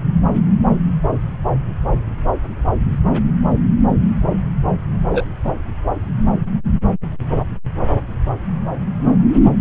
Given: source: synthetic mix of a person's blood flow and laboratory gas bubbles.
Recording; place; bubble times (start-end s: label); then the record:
Doppler ultrasound of blood flow; subclavian vein
5.12-5.25 s: bubbles
5.45-5.52 s: bubbles
From the record:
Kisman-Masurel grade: 113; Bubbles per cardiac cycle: 1 to 2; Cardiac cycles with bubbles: 1 to 10%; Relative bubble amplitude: loud (0.450 to 0.775); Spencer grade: 1 (occasional bubble signal discernible with the cardiac motion signal, with majority of cardiac periods free of bubbles); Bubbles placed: anywhere in the cardiac cycle